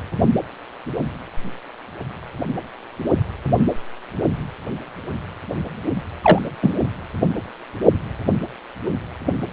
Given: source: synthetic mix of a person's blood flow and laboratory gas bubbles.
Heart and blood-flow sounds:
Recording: Doppler ultrasound of blood flow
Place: precordium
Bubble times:
6.22-6.39 s: bubbles
6.62-6.74 s: bubbles
From the record:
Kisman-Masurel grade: 113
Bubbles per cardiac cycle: 1 to 2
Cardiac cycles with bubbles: 1 to 10%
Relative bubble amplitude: loud (0.450 to 0.775)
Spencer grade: 1 (occasional bubble signal discernible with the cardiac motion signal, with majority of cardiac periods free of bubbles)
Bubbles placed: anywhere in the cardiac cycle

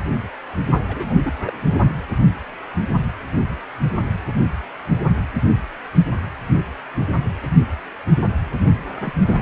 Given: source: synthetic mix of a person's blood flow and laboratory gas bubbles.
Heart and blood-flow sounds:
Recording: Doppler ultrasound of blood flow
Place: precordium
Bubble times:
0.88-1.18 s: bubbles
1.23-1.33 s: bubbles
1.46-1.53 s: bubbles
1.68-1.92 s: bubbles
8.98-9.13 s: bubbles
9.26-9.39 s: bubbles
From the record:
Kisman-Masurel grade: 221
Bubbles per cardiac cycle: several, 3 to 8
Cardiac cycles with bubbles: 10 to 50%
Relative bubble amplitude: barely perceptible (0.100 to 0.250)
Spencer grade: 2 (many but less than half of the cardiac periods contain bubble signals, singularly or in groups)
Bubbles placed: only in the low amplitude regions of the cardiac cycle

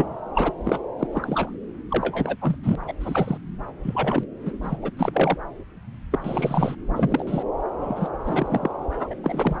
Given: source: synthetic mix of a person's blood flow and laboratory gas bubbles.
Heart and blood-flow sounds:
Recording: Doppler ultrasound of blood flow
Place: subclavian vein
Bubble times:
0.00-0.17 s: bubbles
0.35-0.54 s: bubbles
0.64-0.78 s: bubbles
0.99-1.07 s: bubbles
1.13-1.58 s: bubbles
1.91-2.37 s: bubbles
2.41-2.56 s: bubbles
2.63-2.75 s: bubbles
2.88-2.93 s: bubbles
3.00-3.38 s: bubbles
3.83-4.23 s: bubbles
4.46-4.51 s: bubbles
4.61-4.76 s: bubbles
4.82-4.91 s: bubbles
4.97-5.10 s: bubbles
5.13-5.36 s: bubbles
6.11-6.18 s: bubbles
6.21-6.75 s: bubbles
6.96-7.24 s: bubbles
7.27-7.43 s: bubbles
7.80-8.09 s: bubbles
8.25-8.71 s: bubbles
8.98-9.14 s: bubbles
9.23-9.60 s: bubbles
From the record:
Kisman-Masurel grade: 232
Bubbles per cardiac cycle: several, 3 to 8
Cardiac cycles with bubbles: 50 to 99%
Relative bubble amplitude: moderate (0.250 to 0.450)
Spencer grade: 3 (all of the cardiac periods contain showers or single bubble signals, but not dominating or overriding the cardiac motion signals)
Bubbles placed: anywhere in the cardiac cycle

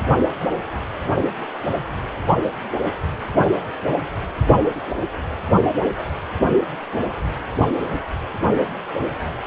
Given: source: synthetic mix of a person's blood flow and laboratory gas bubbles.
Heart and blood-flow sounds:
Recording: Doppler ultrasound of blood flow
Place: precordium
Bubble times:
1.03-1.11 s: bubbles
4.61-4.80 s: bubbles
6.36-6.54 s: bubbles
From the record:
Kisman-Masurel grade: 121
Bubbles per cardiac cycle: 1 to 2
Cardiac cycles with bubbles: 10 to 50%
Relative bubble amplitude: barely perceptible (0.100 to 0.250)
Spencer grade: 2 (many but less than half of the cardiac periods contain bubble signals, singularly or in groups)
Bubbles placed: anywhere in the cardiac cycle

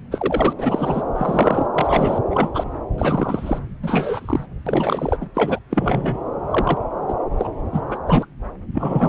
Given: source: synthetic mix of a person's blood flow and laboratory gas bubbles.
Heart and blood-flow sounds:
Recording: Doppler ultrasound of blood flow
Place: subclavian vein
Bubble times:
0.11-0.53 s: bubbles
0.59-1.02 s: bubbles
1.16-1.66 s: bubbles
1.74-2.18 s: bubbles
2.30-2.50 s: bubbles
2.54-2.64 s: bubbles
2.98-3.59 s: bubbles
3.83-4.46 s: bubbles
4.67-5.17 s: bubbles
5.21-5.28 s: bubbles
5.35-5.58 s: bubbles
5.70-6.18 s: bubbles
6.51-6.80 s: bubbles
7.08-7.13 s: bubbles
7.38-7.48 s: bubbles
7.72-7.81 s: bubbles
7.90-7.96 s: bubbles
8.06-8.25 s: bubbles
8.74-9.09 s: bubbles
From the record:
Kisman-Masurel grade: 242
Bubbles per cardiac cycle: several, 3 to 8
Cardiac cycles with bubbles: 100%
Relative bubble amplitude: moderate (0.250 to 0.450)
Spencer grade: 3 (all of the cardiac periods contain showers or single bubble signals, but not dominating or overriding the cardiac motion signals)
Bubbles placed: anywhere in the cardiac cycle

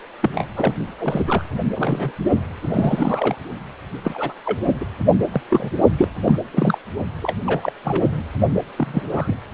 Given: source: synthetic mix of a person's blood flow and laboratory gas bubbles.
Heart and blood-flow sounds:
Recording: Doppler ultrasound of blood flow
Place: precordium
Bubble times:
0.22-0.44 s: bubbles
0.56-0.74 s: bubbles
0.99-1.23 s: bubbles
1.26-1.44 s: bubbles
1.75-2.12 s: bubbles
2.65-3.36 s: bubbles
4.04-4.33 s: bubbles
4.44-4.64 s: bubbles
4.80-4.85 s: bubbles
5.33-5.41 s: bubbles
5.50-5.71 s: bubbles
5.97-6.08 s: bubbles
6.25-6.41 s: bubbles
6.53-6.78 s: bubbles
7.21-7.34 s: bubbles
7.46-7.72 s: bubbles
7.84-8.22 s: bubbles
8.78-9.36 s: bubbles
From the record:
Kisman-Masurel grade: 242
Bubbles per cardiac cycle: several, 3 to 8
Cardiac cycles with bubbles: 100%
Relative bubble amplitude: moderate (0.250 to 0.450)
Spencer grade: 3 (all of the cardiac periods contain showers or single bubble signals, but not dominating or overriding the cardiac motion signals)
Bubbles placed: only in the low amplitude regions of the cardiac cycle

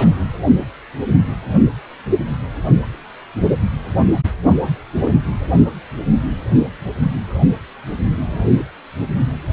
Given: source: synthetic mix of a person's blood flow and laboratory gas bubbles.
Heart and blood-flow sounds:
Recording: Doppler ultrasound of blood flow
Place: precordium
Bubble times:
0.00-0.31 s: bubbles
5.04-5.11 s: bubbles
8.26-8.46 s: bubbles
8.58-8.64 s: bubbles
From the record:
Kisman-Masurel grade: 122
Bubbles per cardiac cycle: 1 to 2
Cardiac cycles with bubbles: 10 to 50%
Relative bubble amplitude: moderate (0.250 to 0.450)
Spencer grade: 2 (many but less than half of the cardiac periods contain bubble signals, singularly or in groups)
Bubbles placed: only in the low amplitude regions of the cardiac cycle

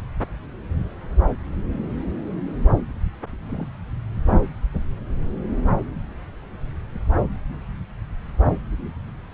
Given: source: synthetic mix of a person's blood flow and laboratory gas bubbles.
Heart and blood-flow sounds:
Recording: Doppler ultrasound of blood flow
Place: subclavian vein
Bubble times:
3.48-3.67 s: bubbles
From the record:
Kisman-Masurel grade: 111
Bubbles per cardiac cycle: 1 to 2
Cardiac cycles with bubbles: 1 to 10%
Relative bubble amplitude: barely perceptible (0.100 to 0.250)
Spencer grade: 1 (occasional bubble signal discernible with the cardiac motion signal, with majority of cardiac periods free of bubbles)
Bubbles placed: anywhere in the cardiac cycle

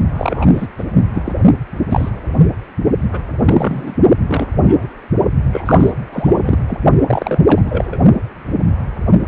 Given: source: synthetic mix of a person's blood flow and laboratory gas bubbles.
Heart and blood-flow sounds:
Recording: Doppler ultrasound of blood flow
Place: precordium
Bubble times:
0.16-0.46 s: bubbles
0.53-0.67 s: bubbles
0.78-0.84 s: bubbles
1.14-1.22 s: bubbles
1.25-1.32 s: bubbles
1.89-2.09 s: bubbles
2.41-2.47 s: bubbles
3.12-3.19 s: bubbles
3.40-3.95 s: bubbles
4.27-4.47 s: bubbles
4.59-4.88 s: bubbles
5.52-5.92 s: bubbles
6.12-6.58 s: bubbles
6.68-6.78 s: bubbles
7.07-7.39 s: bubbles
7.46-7.62 s: bubbles
7.65-7.97 s: bubbles
From the record:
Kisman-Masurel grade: 233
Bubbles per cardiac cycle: several, 3 to 8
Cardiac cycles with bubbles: 50 to 99%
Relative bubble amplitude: loud (0.450 to 0.775)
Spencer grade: 3 (all of the cardiac periods contain showers or single bubble signals, but not dominating or overriding the cardiac motion signals)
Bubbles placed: only in the low amplitude regions of the cardiac cycle

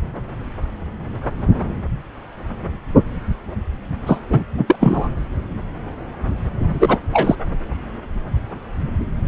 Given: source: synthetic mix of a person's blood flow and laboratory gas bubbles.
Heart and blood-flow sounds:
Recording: Doppler ultrasound of blood flow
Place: subclavian vein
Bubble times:
4.06-4.20 s: bubbles
4.29-4.44 s: bubbles
4.58-4.76 s: bubbles
4.79-5.09 s: bubbles
6.79-6.98 s: bubbles
7.13-7.36 s: bubbles
From the record:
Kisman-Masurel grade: 223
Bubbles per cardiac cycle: several, 3 to 8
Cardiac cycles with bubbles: 10 to 50%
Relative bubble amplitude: loud (0.450 to 0.775)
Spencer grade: 2 (many but less than half of the cardiac periods contain bubble signals, singularly or in groups)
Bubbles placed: anywhere in the cardiac cycle

